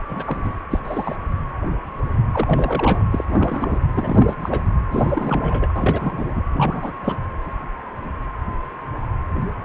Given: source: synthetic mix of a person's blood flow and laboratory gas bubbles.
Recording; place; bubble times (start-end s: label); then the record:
Doppler ultrasound of blood flow; precordium
0.08-0.53 s: bubbles
0.71-0.80 s: bubbles
0.84-1.16 s: bubbles
2.32-3.04 s: bubbles
3.10-3.25 s: bubbles
3.29-3.86 s: bubbles
3.94-4.35 s: bubbles
4.42-4.61 s: bubbles
4.91-5.73 s: bubbles
5.76-6.43 s: bubbles
6.53-6.93 s: bubbles
7.04-7.16 s: bubbles
From the record:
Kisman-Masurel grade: 332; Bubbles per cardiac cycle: rolling drumbeat, 9 or more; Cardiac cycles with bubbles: 50 to 99%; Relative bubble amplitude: moderate (0.250 to 0.450); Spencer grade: 3 (all of the cardiac periods contain showers or single bubble signals, but not dominating or overriding the cardiac motion signals); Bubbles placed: anywhere in the cardiac cycle